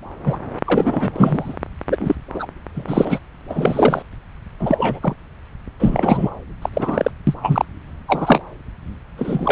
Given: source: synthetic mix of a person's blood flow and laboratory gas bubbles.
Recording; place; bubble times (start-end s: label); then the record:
Doppler ultrasound of blood flow; subclavian vein
0.25-0.37 s: bubbles
0.65-1.13 s: bubbles
1.15-1.57 s: bubbles
1.89-2.15 s: bubbles
2.34-2.46 s: bubbles
2.74-3.19 s: bubbles
3.49-4.03 s: bubbles
4.59-5.16 s: bubbles
5.79-6.30 s: bubbles
6.62-6.70 s: bubbles
6.74-7.11 s: bubbles
7.27-7.35 s: bubbles
7.42-7.65 s: bubbles
8.07-8.40 s: bubbles
9.16-9.52 s: bubbles
From the record:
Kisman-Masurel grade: 233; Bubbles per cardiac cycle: several, 3 to 8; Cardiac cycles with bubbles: 50 to 99%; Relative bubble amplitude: loud (0.450 to 0.775); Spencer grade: 3 (all of the cardiac periods contain showers or single bubble signals, but not dominating or overriding the cardiac motion signals); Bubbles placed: anywhere in the cardiac cycle